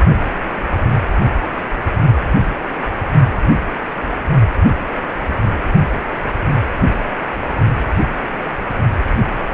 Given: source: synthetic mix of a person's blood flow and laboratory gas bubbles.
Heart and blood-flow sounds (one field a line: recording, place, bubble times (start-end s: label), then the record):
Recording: Doppler ultrasound of blood flow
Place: precordium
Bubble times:
no bubbles
From the record:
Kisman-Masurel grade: 000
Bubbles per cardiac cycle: 0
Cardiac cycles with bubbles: 0%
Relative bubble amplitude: no bubbles discernible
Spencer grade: 0 (complete lack of bubble signals)